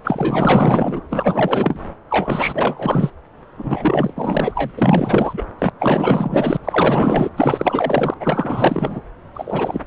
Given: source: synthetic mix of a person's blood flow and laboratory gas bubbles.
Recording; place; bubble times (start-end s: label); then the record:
Doppler ultrasound of blood flow; subclavian vein
0.04-1.01 s: bubbles
1.10-1.79 s: bubbles
2.10-3.10 s: bubbles
3.57-4.72 s: bubbles
4.76-5.45 s: bubbles
5.58-5.70 s: bubbles
5.79-6.57 s: bubbles
6.64-7.29 s: bubbles
7.36-8.14 s: bubbles
8.20-9.00 s: bubbles
9.34-9.80 s: bubbles
From the record:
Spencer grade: 4 (maximum detectable bubble signal sounding continuously throughout systole and diastole of every cardiac period, and overriding the amplitude of the normal cardiac signals); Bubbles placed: anywhere in the cardiac cycle